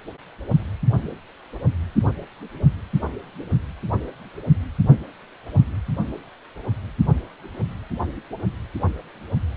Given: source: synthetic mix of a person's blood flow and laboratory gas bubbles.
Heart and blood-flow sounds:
Doppler ultrasound of blood flow; precordium
no bubbles
From the record:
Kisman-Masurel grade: 000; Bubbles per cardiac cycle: 0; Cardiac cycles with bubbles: 0%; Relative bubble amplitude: no bubbles discernible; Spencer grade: 0 (complete lack of bubble signals)

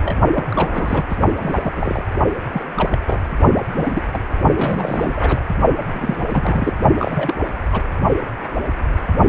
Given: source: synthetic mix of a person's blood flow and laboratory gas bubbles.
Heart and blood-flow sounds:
Doppler ultrasound of blood flow; precordium
0.00-0.14 s: bubbles
0.33-0.48 s: bubbles
0.52-1.05 s: bubbles
1.09-1.16 s: bubbles
1.36-2.04 s: bubbles
2.52-2.64 s: bubbles
2.77-3.01 s: bubbles
3.07-3.20 s: bubbles
3.55-3.60 s: bubbles
3.76-4.03 s: bubbles
4.12-4.21 s: bubbles
4.55-5.41 s: bubbles
5.84-6.24 s: bubbles
6.28-6.73 s: bubbles
6.97-7.35 s: bubbles
7.72-7.81 s: bubbles
From the record:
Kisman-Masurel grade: 232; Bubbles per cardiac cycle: several, 3 to 8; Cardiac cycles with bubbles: 50 to 99%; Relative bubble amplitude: moderate (0.250 to 0.450); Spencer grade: 3 (all of the cardiac periods contain showers or single bubble signals, but not dominating or overriding the cardiac motion signals); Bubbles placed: only in the low amplitude regions of the cardiac cycle

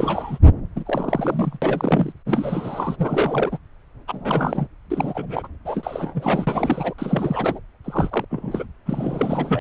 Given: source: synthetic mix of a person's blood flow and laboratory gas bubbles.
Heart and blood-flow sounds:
Doppler ultrasound of blood flow; subclavian vein
0.00-0.38 s: bubbles
0.75-1.57 s: bubbles
1.61-2.12 s: bubbles
2.26-2.96 s: bubbles
2.99-3.58 s: bubbles
4.08-4.67 s: bubbles
4.90-5.48 s: bubbles
5.65-6.94 s: bubbles
6.98-7.60 s: bubbles
7.84-8.25 s: bubbles
8.30-8.65 s: bubbles
8.86-9.60 s: bubbles
From the record:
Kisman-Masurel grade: 342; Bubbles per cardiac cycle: rolling drumbeat, 9 or more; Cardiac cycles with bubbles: 100%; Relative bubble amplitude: moderate (0.250 to 0.450); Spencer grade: 3 (all of the cardiac periods contain showers or single bubble signals, but not dominating or overriding the cardiac motion signals); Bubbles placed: anywhere in the cardiac cycle

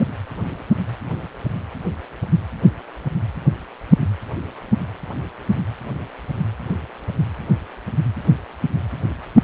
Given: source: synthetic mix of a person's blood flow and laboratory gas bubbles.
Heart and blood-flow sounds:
Doppler ultrasound of blood flow; precordium
0.00-0.05 s: bubbles
From the record:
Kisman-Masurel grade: 213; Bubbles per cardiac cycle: several, 3 to 8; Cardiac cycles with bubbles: 1 to 10%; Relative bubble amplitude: loud (0.450 to 0.775); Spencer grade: 1 (occasional bubble signal discernible with the cardiac motion signal, with majority of cardiac periods free of bubbles); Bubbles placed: anywhere in the cardiac cycle

